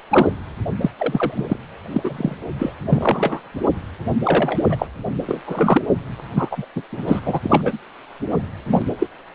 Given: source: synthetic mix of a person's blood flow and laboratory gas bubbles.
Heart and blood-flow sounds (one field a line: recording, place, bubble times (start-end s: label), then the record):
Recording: Doppler ultrasound of blood flow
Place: precordium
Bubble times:
0.10-0.27 s: bubbles
0.80-0.90 s: bubbles
0.96-1.47 s: bubbles
1.49-1.57 s: bubbles
1.91-2.35 s: bubbles
2.58-2.73 s: bubbles
2.89-3.40 s: bubbles
4.25-4.58 s: bubbles
4.70-4.88 s: bubbles
5.26-5.41 s: bubbles
5.45-5.82 s: bubbles
6.35-6.66 s: bubbles
6.75-6.82 s: bubbles
6.92-7.20 s: bubbles
7.25-7.39 s: bubbles
7.42-7.77 s: bubbles
8.66-8.82 s: bubbles
8.99-9.07 s: bubbles
From the record:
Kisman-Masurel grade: 242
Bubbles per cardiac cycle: several, 3 to 8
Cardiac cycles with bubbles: 100%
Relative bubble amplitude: moderate (0.250 to 0.450)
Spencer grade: 3 (all of the cardiac periods contain showers or single bubble signals, but not dominating or overriding the cardiac motion signals)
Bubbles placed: anywhere in the cardiac cycle